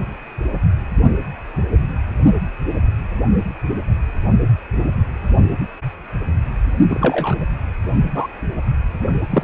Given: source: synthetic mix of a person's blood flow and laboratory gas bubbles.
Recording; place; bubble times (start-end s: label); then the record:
Doppler ultrasound of blood flow; precordium
6.89-7.36 s: bubbles
8.14-8.27 s: bubbles
9.30-9.44 s: bubbles
From the record:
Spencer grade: 2 (many but less than half of the cardiac periods contain bubble signals, singularly or in groups); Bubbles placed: only in the low amplitude regions of the cardiac cycle